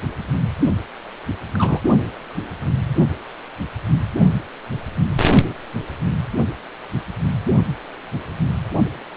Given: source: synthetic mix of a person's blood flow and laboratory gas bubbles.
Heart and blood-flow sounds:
Doppler ultrasound of blood flow; precordium
1.54-1.82 s: bubbles
From the record:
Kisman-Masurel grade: 112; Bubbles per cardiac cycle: 1 to 2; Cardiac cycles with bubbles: 1 to 10%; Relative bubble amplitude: moderate (0.250 to 0.450); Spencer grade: 1 (occasional bubble signal discernible with the cardiac motion signal, with majority of cardiac periods free of bubbles); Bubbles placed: only in the low amplitude regions of the cardiac cycle

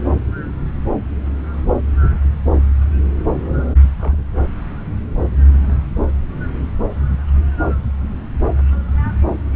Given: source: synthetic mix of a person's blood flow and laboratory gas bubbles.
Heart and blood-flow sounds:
Doppler ultrasound of blood flow; subclavian vein
3.99-4.22 s: bubbles
From the record:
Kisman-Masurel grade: 111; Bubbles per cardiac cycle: 1 to 2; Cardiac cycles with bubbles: 1 to 10%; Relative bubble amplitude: barely perceptible (0.100 to 0.250); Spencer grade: 1 (occasional bubble signal discernible with the cardiac motion signal, with majority of cardiac periods free of bubbles); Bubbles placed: anywhere in the cardiac cycle

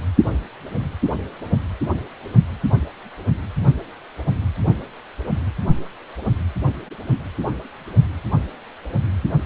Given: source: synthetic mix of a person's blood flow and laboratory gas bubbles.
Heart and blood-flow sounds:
Doppler ultrasound of blood flow; precordium
no bubbles
From the record:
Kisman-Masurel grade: 000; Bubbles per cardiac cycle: 0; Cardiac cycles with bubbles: 0%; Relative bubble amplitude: no bubbles discernible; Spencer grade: 0 (complete lack of bubble signals)

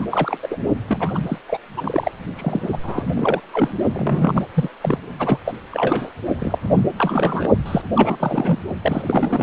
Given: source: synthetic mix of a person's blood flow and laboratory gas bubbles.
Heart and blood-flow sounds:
Doppler ultrasound of blood flow; precordium
0.00-0.06 s: bubbles
0.09-0.38 s: bubbles
0.42-0.58 s: bubbles
0.88-1.19 s: bubbles
1.26-1.38 s: bubbles
1.47-1.58 s: bubbles
1.76-2.11 s: bubbles
2.35-2.77 s: bubbles
2.83-3.41 s: bubbles
3.53-3.72 s: bubbles
3.92-4.42 s: bubbles
4.54-4.69 s: bubbles
4.81-4.98 s: bubbles
5.19-5.38 s: bubbles
5.45-5.53 s: bubbles
5.71-6.12 s: bubbles
6.38-6.58 s: bubbles
6.65-6.83 s: bubbles
6.96-7.48 s: bubbles
7.66-7.82 s: bubbles
7.95-8.16 s: bubbles
8.20-8.58 s: bubbles
8.81-9.43 s: bubbles
From the record:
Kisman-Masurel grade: 342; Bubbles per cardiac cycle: rolling drumbeat, 9 or more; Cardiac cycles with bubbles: 100%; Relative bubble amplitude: moderate (0.250 to 0.450); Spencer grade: 3 (all of the cardiac periods contain showers or single bubble signals, but not dominating or overriding the cardiac motion signals); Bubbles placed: only in the low amplitude regions of the cardiac cycle

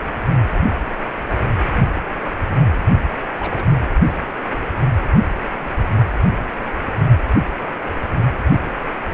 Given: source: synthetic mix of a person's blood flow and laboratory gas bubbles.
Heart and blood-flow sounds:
Doppler ultrasound of blood flow; precordium
3.39-3.68 s: bubbles
From the record:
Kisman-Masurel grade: 111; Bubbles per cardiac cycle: 1 to 2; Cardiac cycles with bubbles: 1 to 10%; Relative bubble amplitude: barely perceptible (0.100 to 0.250); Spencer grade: 1 (occasional bubble signal discernible with the cardiac motion signal, with majority of cardiac periods free of bubbles); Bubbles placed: anywhere in the cardiac cycle

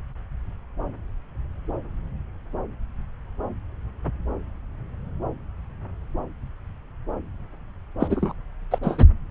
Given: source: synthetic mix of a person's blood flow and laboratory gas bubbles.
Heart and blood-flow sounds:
Doppler ultrasound of blood flow; subclavian vein
7.99-8.33 s: bubbles
8.71-8.79 s: bubbles
8.82-9.04 s: bubbles
From the record:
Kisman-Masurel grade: 212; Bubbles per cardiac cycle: several, 3 to 8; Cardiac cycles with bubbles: 1 to 10%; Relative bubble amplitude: moderate (0.250 to 0.450); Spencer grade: 1 (occasional bubble signal discernible with the cardiac motion signal, with majority of cardiac periods free of bubbles); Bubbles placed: anywhere in the cardiac cycle

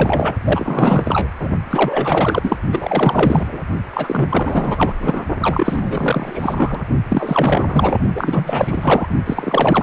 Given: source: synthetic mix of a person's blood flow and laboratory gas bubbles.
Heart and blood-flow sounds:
Doppler ultrasound of blood flow; precordium
0.00-0.35 s: bubbles
0.44-1.28 s: bubbles
1.39-1.49 s: bubbles
1.70-2.57 s: bubbles
2.71-3.61 s: bubbles
3.93-4.92 s: bubbles
4.99-5.25 s: bubbles
5.40-6.84 s: bubbles
7.09-7.99 s: bubbles
8.14-9.06 s: bubbles
9.26-9.83 s: bubbles
From the record:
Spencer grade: 4 (maximum detectable bubble signal sounding continuously throughout systole and diastole of every cardiac period, and overriding the amplitude of the normal cardiac signals); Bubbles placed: only in the low amplitude regions of the cardiac cycle

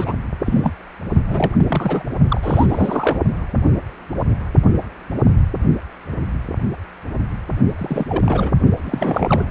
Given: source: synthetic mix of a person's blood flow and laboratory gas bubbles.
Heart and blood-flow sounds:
Doppler ultrasound of blood flow; precordium
0.00-0.15 s: bubbles
0.45-0.73 s: bubbles
1.27-1.55 s: bubbles
1.58-2.02 s: bubbles
2.28-3.17 s: bubbles
7.78-8.06 s: bubbles
8.09-8.53 s: bubbles
8.84-9.45 s: bubbles
From the record:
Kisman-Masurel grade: 332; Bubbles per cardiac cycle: rolling drumbeat, 9 or more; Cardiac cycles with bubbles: 50 to 99%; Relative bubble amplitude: moderate (0.250 to 0.450); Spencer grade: 3 (all of the cardiac periods contain showers or single bubble signals, but not dominating or overriding the cardiac motion signals); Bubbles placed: only in the low amplitude regions of the cardiac cycle

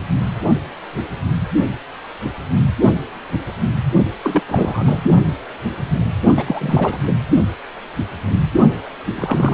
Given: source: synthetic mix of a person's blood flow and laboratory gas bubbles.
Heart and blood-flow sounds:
Doppler ultrasound of blood flow; precordium
4.23-4.41 s: bubbles
4.50-5.00 s: bubbles
6.36-6.99 s: bubbles
7.06-7.17 s: bubbles
9.16-9.54 s: bubbles
From the record:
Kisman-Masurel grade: 222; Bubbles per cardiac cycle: several, 3 to 8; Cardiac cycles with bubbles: 10 to 50%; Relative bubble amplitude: moderate (0.250 to 0.450); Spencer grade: 2 (many but less than half of the cardiac periods contain bubble signals, singularly or in groups); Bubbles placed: only in the low amplitude regions of the cardiac cycle

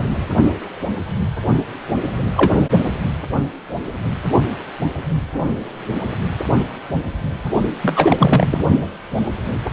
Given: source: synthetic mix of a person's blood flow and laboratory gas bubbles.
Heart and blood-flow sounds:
Doppler ultrasound of blood flow; precordium
2.36-2.62 s: bubbles
7.82-8.65 s: bubbles
From the record:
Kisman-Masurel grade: 223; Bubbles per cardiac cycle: several, 3 to 8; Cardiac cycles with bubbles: 10 to 50%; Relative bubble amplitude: loud (0.450 to 0.775); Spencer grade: 2 (many but less than half of the cardiac periods contain bubble signals, singularly or in groups); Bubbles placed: only in the low amplitude regions of the cardiac cycle

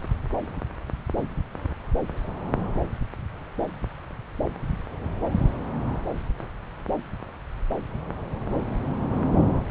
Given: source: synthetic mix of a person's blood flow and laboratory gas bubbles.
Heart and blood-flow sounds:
Doppler ultrasound of blood flow; subclavian vein
no bubbles
From the record:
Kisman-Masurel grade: 000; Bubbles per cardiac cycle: 0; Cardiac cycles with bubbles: 0%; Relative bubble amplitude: no bubbles discernible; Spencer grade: 0 (complete lack of bubble signals)

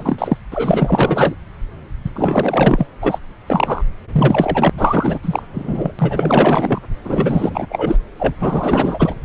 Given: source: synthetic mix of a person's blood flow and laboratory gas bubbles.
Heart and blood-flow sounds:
Doppler ultrasound of blood flow; subclavian vein
0.00-0.37 s: bubbles
0.52-1.35 s: bubbles
2.04-2.10 s: bubbles
2.15-2.86 s: bubbles
3.02-3.19 s: bubbles
3.46-3.83 s: bubbles
4.12-4.70 s: bubbles
4.78-5.18 s: bubbles
5.22-5.42 s: bubbles
5.54-5.92 s: bubbles
5.99-6.79 s: bubbles
7.04-7.66 s: bubbles
7.69-7.97 s: bubbles
8.18-8.35 s: bubbles
8.39-9.15 s: bubbles
From the record:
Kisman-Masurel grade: 444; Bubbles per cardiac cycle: continuous sound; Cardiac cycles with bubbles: 100%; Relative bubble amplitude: maximal (0.775 to 0.999); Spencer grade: 4 (maximum detectable bubble signal sounding continuously throughout systole and diastole of every cardiac period, and overriding the amplitude of the normal cardiac signals); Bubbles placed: anywhere in the cardiac cycle

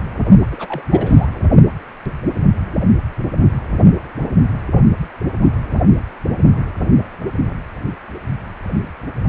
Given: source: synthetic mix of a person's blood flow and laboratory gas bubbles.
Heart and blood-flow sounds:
Doppler ultrasound of blood flow; precordium
0.51-0.88 s: bubbles
0.92-1.27 s: bubbles
From the record:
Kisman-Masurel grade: 212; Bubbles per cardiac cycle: several, 3 to 8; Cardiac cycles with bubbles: 1 to 10%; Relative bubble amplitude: moderate (0.250 to 0.450); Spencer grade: 1 (occasional bubble signal discernible with the cardiac motion signal, with majority of cardiac periods free of bubbles); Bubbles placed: only in the low amplitude regions of the cardiac cycle

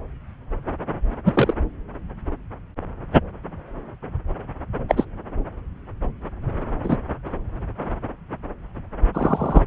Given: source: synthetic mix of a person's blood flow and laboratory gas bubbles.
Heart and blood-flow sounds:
Doppler ultrasound of blood flow; subclavian vein
1.25-1.54 s: bubbles
4.88-5.05 s: bubbles
6.83-6.97 s: bubbles
9.13-9.62 s: bubbles
From the record:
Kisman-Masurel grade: 123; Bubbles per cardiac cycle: 1 to 2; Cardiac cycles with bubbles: 10 to 50%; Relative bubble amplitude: loud (0.450 to 0.775); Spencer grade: 2 (many but less than half of the cardiac periods contain bubble signals, singularly or in groups); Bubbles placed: anywhere in the cardiac cycle

